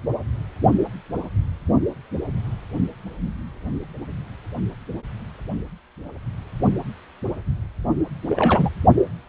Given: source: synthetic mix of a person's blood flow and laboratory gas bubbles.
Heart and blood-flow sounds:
Doppler ultrasound of blood flow; precordium
8.29-8.69 s: bubbles
From the record:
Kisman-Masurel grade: 212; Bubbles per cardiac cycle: several, 3 to 8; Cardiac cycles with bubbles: 1 to 10%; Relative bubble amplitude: moderate (0.250 to 0.450); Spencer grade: 1 (occasional bubble signal discernible with the cardiac motion signal, with majority of cardiac periods free of bubbles); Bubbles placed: only in the low amplitude regions of the cardiac cycle

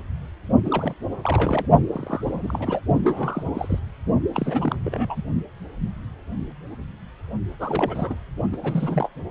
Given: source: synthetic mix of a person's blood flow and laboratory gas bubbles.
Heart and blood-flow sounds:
Doppler ultrasound of blood flow; precordium
0.65-0.95 s: bubbles
1.23-1.66 s: bubbles
1.92-2.80 s: bubbles
3.04-3.79 s: bubbles
4.34-5.22 s: bubbles
7.59-8.16 s: bubbles
8.52-8.57 s: bubbles
8.62-9.09 s: bubbles
From the record:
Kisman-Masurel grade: 332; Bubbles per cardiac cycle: rolling drumbeat, 9 or more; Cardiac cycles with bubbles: 50 to 99%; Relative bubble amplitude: moderate (0.250 to 0.450); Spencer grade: 3 (all of the cardiac periods contain showers or single bubble signals, but not dominating or overriding the cardiac motion signals); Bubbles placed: only in the low amplitude regions of the cardiac cycle

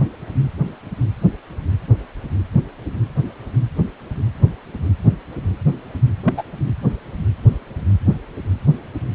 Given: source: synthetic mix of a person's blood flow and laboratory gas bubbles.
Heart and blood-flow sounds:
Doppler ultrasound of blood flow; precordium
6.25-6.34 s: bubbles
6.37-6.44 s: bubbles
From the record:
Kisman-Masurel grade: 113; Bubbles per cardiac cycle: 1 to 2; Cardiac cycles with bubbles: 1 to 10%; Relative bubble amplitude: loud (0.450 to 0.775); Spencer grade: 1 (occasional bubble signal discernible with the cardiac motion signal, with majority of cardiac periods free of bubbles); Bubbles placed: anywhere in the cardiac cycle

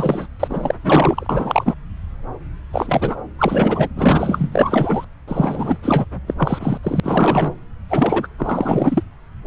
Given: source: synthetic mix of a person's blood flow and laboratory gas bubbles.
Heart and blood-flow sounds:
Doppler ultrasound of blood flow; subclavian vein
0.00-0.27 s: bubbles
0.40-0.75 s: bubbles
0.83-1.27 s: bubbles
1.29-1.74 s: bubbles
2.72-3.16 s: bubbles
3.38-3.89 s: bubbles
3.96-5.04 s: bubbles
5.28-5.77 s: bubbles
5.83-6.05 s: bubbles
6.27-6.34 s: bubbles
6.38-6.78 s: bubbles
6.83-7.00 s: bubbles
7.03-7.53 s: bubbles
7.89-8.27 s: bubbles
8.38-9.03 s: bubbles
From the record:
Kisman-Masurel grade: 333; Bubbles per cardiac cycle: rolling drumbeat, 9 or more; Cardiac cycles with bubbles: 50 to 99%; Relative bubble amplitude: loud (0.450 to 0.775); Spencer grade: 3 (all of the cardiac periods contain showers or single bubble signals, but not dominating or overriding the cardiac motion signals); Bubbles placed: anywhere in the cardiac cycle

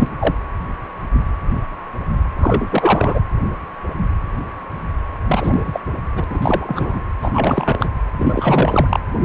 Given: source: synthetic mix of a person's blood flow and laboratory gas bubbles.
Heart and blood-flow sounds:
Doppler ultrasound of blood flow; precordium
0.00-0.16 s: bubbles
0.19-0.35 s: bubbles
2.38-3.20 s: bubbles
5.25-5.79 s: bubbles
6.15-6.25 s: bubbles
6.30-6.39 s: bubbles
6.42-7.04 s: bubbles
7.21-7.89 s: bubbles
8.19-9.00 s: bubbles
From the record:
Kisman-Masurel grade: 332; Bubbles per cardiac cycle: rolling drumbeat, 9 or more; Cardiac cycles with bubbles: 50 to 99%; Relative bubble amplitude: moderate (0.250 to 0.450); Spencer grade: 3 (all of the cardiac periods contain showers or single bubble signals, but not dominating or overriding the cardiac motion signals); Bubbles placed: anywhere in the cardiac cycle

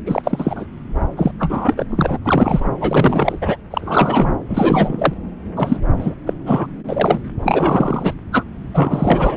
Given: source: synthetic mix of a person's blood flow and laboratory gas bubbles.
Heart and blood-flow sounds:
Doppler ultrasound of blood flow; subclavian vein
0.05-0.66 s: bubbles
1.17-1.31 s: bubbles
1.39-1.86 s: bubbles
1.89-2.18 s: bubbles
2.25-2.68 s: bubbles
2.80-3.57 s: bubbles
3.70-4.31 s: bubbles
4.50-5.13 s: bubbles
5.56-5.80 s: bubbles
5.98-6.15 s: bubbles
6.26-6.33 s: bubbles
6.46-6.67 s: bubbles
6.88-7.22 s: bubbles
7.43-8.14 s: bubbles
8.32-8.44 s: bubbles
8.74-9.37 s: bubbles
From the record:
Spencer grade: 3 (all of the cardiac periods contain showers or single bubble signals, but not dominating or overriding the cardiac motion signals); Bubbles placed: anywhere in the cardiac cycle

